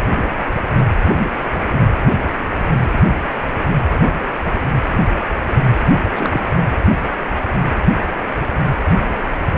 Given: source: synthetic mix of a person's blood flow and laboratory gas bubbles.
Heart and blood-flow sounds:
Doppler ultrasound of blood flow; precordium
6.12-6.56 s: bubbles
From the record:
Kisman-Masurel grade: 222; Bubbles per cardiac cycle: several, 3 to 8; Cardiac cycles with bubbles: 10 to 50%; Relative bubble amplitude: moderate (0.250 to 0.450); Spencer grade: 2 (many but less than half of the cardiac periods contain bubble signals, singularly or in groups); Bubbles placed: anywhere in the cardiac cycle

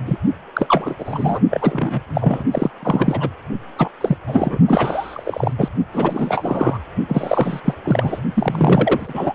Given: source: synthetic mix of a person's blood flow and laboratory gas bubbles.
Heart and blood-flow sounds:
Doppler ultrasound of blood flow; precordium
0.05-0.18 s: bubbles
0.54-0.96 s: bubbles
0.98-1.40 s: bubbles
1.50-2.01 s: bubbles
2.14-2.43 s: bubbles
2.53-2.70 s: bubbles
2.83-3.29 s: bubbles
3.77-3.89 s: bubbles
4.00-4.17 s: bubbles
4.27-4.58 s: bubbles
4.67-5.54 s: bubbles
5.58-5.68 s: bubbles
5.92-6.77 s: bubbles
7.08-7.60 s: bubbles
7.64-7.74 s: bubbles
7.83-8.20 s: bubbles
8.34-9.35 s: bubbles
From the record:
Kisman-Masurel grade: 343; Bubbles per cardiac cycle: rolling drumbeat, 9 or more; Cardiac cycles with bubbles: 100%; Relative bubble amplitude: loud (0.450 to 0.775); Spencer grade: 3 (all of the cardiac periods contain showers or single bubble signals, but not dominating or overriding the cardiac motion signals); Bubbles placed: only in the low amplitude regions of the cardiac cycle

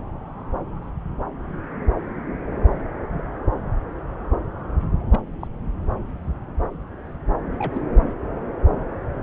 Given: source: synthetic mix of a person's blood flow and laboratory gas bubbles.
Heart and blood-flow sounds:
Doppler ultrasound of blood flow; subclavian vein
3.17-3.21 s: bubbles
5.11-5.20 s: bubbles
5.41-5.47 s: bubbles
7.58-7.82 s: bubbles
From the record:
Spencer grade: 2 (many but less than half of the cardiac periods contain bubble signals, singularly or in groups); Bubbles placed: anywhere in the cardiac cycle

